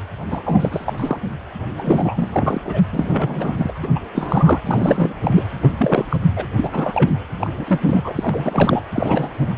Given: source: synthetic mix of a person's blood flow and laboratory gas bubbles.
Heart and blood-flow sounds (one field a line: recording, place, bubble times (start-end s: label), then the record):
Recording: Doppler ultrasound of blood flow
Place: precordium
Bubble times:
0.30-0.43 s: bubbles
0.45-0.93 s: bubbles
0.97-1.18 s: bubbles
1.76-2.61 s: bubbles
2.65-2.81 s: bubbles
2.92-3.72 s: bubbles
3.82-3.87 s: bubbles
3.95-3.99 s: bubbles
4.13-4.62 s: bubbles
4.67-5.16 s: bubbles
5.22-5.48 s: bubbles
5.62-6.17 s: bubbles
6.36-6.46 s: bubbles
6.56-7.20 s: bubbles
7.41-7.50 s: bubbles
7.57-8.14 s: bubbles
8.18-8.83 s: bubbles
8.93-9.54 s: bubbles
From the record:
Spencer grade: 3 (all of the cardiac periods contain showers or single bubble signals, but not dominating or overriding the cardiac motion signals)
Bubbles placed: anywhere in the cardiac cycle